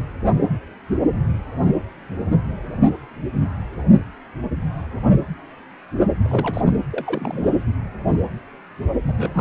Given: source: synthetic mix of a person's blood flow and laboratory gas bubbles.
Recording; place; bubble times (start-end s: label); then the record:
Doppler ultrasound of blood flow; precordium
6.23-6.72 s: bubbles
6.92-7.62 s: bubbles
9.03-9.41 s: bubbles
From the record:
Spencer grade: 2 (many but less than half of the cardiac periods contain bubble signals, singularly or in groups); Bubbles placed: anywhere in the cardiac cycle